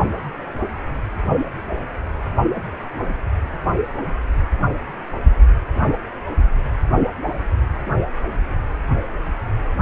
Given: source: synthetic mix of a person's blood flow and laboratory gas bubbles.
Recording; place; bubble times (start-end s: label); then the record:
Doppler ultrasound of blood flow; precordium
no bubbles
From the record:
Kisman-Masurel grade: 000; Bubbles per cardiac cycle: 0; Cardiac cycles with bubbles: 0%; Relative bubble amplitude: no bubbles discernible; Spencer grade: 0 (complete lack of bubble signals)